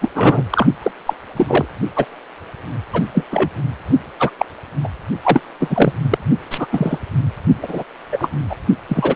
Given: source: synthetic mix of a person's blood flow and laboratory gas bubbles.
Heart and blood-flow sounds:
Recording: Doppler ultrasound of blood flow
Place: precordium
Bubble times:
0.01-0.09 s: bubbles
0.15-0.44 s: bubbles
0.50-0.67 s: bubbles
0.82-0.92 s: bubbles
1.06-1.14 s: bubbles
1.36-1.66 s: bubbles
1.96-2.05 s: bubbles
2.93-3.03 s: bubbles
3.14-3.24 s: bubbles
3.31-3.49 s: bubbles
4.19-4.30 s: bubbles
4.38-4.46 s: bubbles
4.83-4.89 s: bubbles
5.23-5.41 s: bubbles
5.59-5.93 s: bubbles
6.10-6.18 s: bubbles
6.50-6.67 s: bubbles
6.71-6.98 s: bubbles
7.62-7.83 s: bubbles
8.12-8.29 s: bubbles
8.50-8.55 s: bubbles
8.89-9.15 s: bubbles
From the record:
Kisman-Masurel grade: 243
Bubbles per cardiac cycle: several, 3 to 8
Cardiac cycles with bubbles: 100%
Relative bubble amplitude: loud (0.450 to 0.775)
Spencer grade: 3 (all of the cardiac periods contain showers or single bubble signals, but not dominating or overriding the cardiac motion signals)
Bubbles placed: only in the low amplitude regions of the cardiac cycle

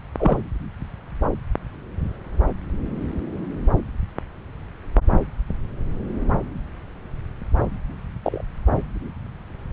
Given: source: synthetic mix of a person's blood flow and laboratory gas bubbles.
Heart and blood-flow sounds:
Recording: Doppler ultrasound of blood flow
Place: subclavian vein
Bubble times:
0.18-0.44 s: bubbles
8.23-8.41 s: bubbles
From the record:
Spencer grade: 2 (many but less than half of the cardiac periods contain bubble signals, singularly or in groups)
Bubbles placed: anywhere in the cardiac cycle

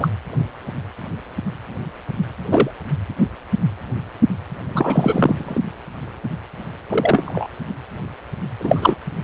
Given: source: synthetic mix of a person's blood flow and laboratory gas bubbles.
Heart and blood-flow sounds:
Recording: Doppler ultrasound of blood flow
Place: precordium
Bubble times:
0.00-0.09 s: bubbles
2.51-2.71 s: bubbles
4.68-5.61 s: bubbles
6.89-7.47 s: bubbles
8.60-8.96 s: bubbles
From the record:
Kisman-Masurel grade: 223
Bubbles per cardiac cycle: several, 3 to 8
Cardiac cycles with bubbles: 10 to 50%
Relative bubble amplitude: loud (0.450 to 0.775)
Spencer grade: 2 (many but less than half of the cardiac periods contain bubble signals, singularly or in groups)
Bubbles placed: anywhere in the cardiac cycle

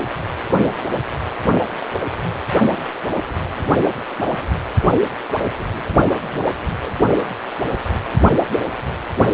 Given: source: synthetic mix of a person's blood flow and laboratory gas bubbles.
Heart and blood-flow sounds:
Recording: Doppler ultrasound of blood flow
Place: precordium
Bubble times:
6.06-6.11 s: bubbles
6.29-6.56 s: bubbles
6.86-6.95 s: bubbles
From the record:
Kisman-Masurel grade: 221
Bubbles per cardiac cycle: several, 3 to 8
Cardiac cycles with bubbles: 10 to 50%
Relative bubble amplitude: barely perceptible (0.100 to 0.250)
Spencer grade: 2 (many but less than half of the cardiac periods contain bubble signals, singularly or in groups)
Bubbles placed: only in the low amplitude regions of the cardiac cycle

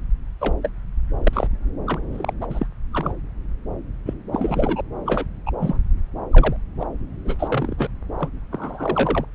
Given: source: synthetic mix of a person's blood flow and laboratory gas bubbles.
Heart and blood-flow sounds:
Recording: Doppler ultrasound of blood flow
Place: subclavian vein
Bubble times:
0.41-0.54 s: bubbles
0.62-0.69 s: bubbles
1.23-1.47 s: bubbles
1.86-1.99 s: bubbles
2.12-2.33 s: bubbles
2.40-2.47 s: bubbles
2.50-2.66 s: bubbles
2.92-3.13 s: bubbles
4.06-4.14 s: bubbles
4.33-4.81 s: bubbles
5.04-5.25 s: bubbles
5.46-5.51 s: bubbles
5.60-5.79 s: bubbles
6.31-6.56 s: bubbles
6.80-6.86 s: bubbles
7.25-7.36 s: bubbles
7.38-7.87 s: bubbles
8.19-8.29 s: bubbles
8.51-9.25 s: bubbles
From the record:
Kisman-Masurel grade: 242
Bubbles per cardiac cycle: several, 3 to 8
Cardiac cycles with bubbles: 100%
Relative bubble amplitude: moderate (0.250 to 0.450)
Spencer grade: 3 (all of the cardiac periods contain showers or single bubble signals, but not dominating or overriding the cardiac motion signals)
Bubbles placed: anywhere in the cardiac cycle

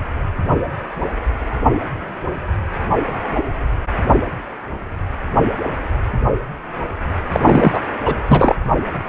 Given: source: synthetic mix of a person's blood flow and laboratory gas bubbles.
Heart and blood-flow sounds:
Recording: Doppler ultrasound of blood flow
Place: precordium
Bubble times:
7.32-7.40 s: bubbles
7.42-7.80 s: bubbles
8.05-8.15 s: bubbles
8.27-8.55 s: bubbles
From the record:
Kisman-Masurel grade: 213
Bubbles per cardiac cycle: several, 3 to 8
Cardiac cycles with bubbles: 1 to 10%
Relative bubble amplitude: loud (0.450 to 0.775)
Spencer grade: 1 (occasional bubble signal discernible with the cardiac motion signal, with majority of cardiac periods free of bubbles)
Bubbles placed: anywhere in the cardiac cycle

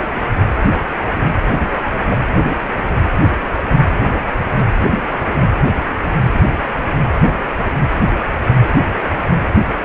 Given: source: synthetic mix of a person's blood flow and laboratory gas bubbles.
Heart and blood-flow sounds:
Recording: Doppler ultrasound of blood flow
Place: precordium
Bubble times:
2.10-2.17 s: bubbles
From the record:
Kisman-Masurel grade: 112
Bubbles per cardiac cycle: 1 to 2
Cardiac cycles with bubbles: 1 to 10%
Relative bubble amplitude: moderate (0.250 to 0.450)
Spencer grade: 1 (occasional bubble signal discernible with the cardiac motion signal, with majority of cardiac periods free of bubbles)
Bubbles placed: anywhere in the cardiac cycle

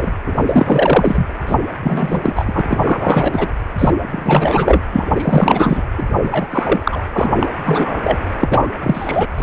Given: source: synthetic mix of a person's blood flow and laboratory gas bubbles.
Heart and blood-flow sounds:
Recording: Doppler ultrasound of blood flow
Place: precordium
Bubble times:
0.00-0.12 s: bubbles
0.26-1.26 s: bubbles
1.46-1.56 s: bubbles
1.82-3.52 s: bubbles
3.78-3.90 s: bubbles
4.11-4.81 s: bubbles
4.92-5.83 s: bubbles
5.98-6.04 s: bubbles
6.20-7.02 s: bubbles
7.13-7.49 s: bubbles
7.65-8.19 s: bubbles
8.38-8.69 s: bubbles
8.83-9.27 s: bubbles
9.38-9.43 s: bubbles
From the record:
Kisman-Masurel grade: 343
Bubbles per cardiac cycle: rolling drumbeat, 9 or more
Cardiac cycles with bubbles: 100%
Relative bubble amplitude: loud (0.450 to 0.775)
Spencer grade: 3 (all of the cardiac periods contain showers or single bubble signals, but not dominating or overriding the cardiac motion signals)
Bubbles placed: anywhere in the cardiac cycle

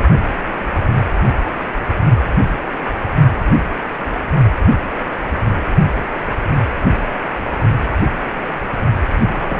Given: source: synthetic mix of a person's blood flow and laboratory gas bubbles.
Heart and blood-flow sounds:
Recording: Doppler ultrasound of blood flow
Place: precordium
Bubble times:
9.21-9.60 s: bubbles
From the record:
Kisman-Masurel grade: 211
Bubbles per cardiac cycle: several, 3 to 8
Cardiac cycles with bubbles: 1 to 10%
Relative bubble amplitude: barely perceptible (0.100 to 0.250)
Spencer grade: 1 (occasional bubble signal discernible with the cardiac motion signal, with majority of cardiac periods free of bubbles)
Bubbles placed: only in the low amplitude regions of the cardiac cycle

